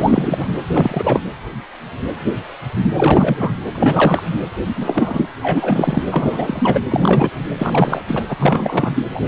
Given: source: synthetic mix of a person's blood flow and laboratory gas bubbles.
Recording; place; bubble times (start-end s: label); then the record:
Doppler ultrasound of blood flow; precordium
0.00-0.47 s: bubbles
0.74-1.20 s: bubbles
2.96-3.56 s: bubbles
3.74-4.28 s: bubbles
4.76-5.29 s: bubbles
5.41-6.02 s: bubbles
6.11-6.86 s: bubbles
6.90-7.29 s: bubbles
7.58-8.02 s: bubbles
8.07-8.24 s: bubbles
8.29-8.36 s: bubbles
8.39-8.92 s: bubbles
9.09-9.21 s: bubbles
From the record:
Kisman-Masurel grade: 333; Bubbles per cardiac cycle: rolling drumbeat, 9 or more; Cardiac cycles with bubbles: 50 to 99%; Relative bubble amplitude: loud (0.450 to 0.775); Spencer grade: 3 (all of the cardiac periods contain showers or single bubble signals, but not dominating or overriding the cardiac motion signals); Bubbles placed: anywhere in the cardiac cycle